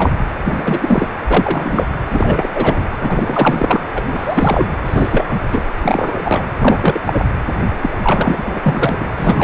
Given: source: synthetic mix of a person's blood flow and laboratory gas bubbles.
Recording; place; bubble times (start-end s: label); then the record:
Doppler ultrasound of blood flow; precordium
0.00-0.10 s: bubbles
0.45-0.79 s: bubbles
0.81-1.08 s: bubbles
1.28-1.85 s: bubbles
2.10-2.49 s: bubbles
2.55-2.87 s: bubbles
3.01-3.80 s: bubbles
3.94-4.04 s: bubbles
4.06-4.69 s: bubbles
4.85-5.25 s: bubbles
5.29-5.39 s: bubbles
5.51-5.62 s: bubbles
5.82-6.52 s: bubbles
6.60-7.00 s: bubbles
7.05-7.24 s: bubbles
7.82-7.90 s: bubbles
8.02-8.61 s: bubbles
8.63-9.08 s: bubbles
9.17-9.44 s: bubbles
From the record:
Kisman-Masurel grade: 343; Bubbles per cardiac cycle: rolling drumbeat, 9 or more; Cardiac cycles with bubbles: 100%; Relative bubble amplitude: loud (0.450 to 0.775); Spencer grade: 3 (all of the cardiac periods contain showers or single bubble signals, but not dominating or overriding the cardiac motion signals); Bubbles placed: anywhere in the cardiac cycle